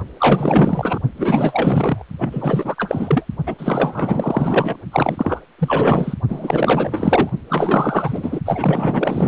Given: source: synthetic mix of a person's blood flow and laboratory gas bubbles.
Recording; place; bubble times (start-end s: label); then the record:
Doppler ultrasound of blood flow; precordium
0.18-1.00 s: bubbles
1.17-2.04 s: bubbles
2.18-3.25 s: bubbles
3.46-3.55 s: bubbles
3.58-4.78 s: bubbles
4.92-5.42 s: bubbles
5.58-6.14 s: bubbles
6.29-7.29 s: bubbles
7.49-8.40 s: bubbles
8.46-9.28 s: bubbles
From the record:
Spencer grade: 4 (maximum detectable bubble signal sounding continuously throughout systole and diastole of every cardiac period, and overriding the amplitude of the normal cardiac signals); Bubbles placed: only in the low amplitude regions of the cardiac cycle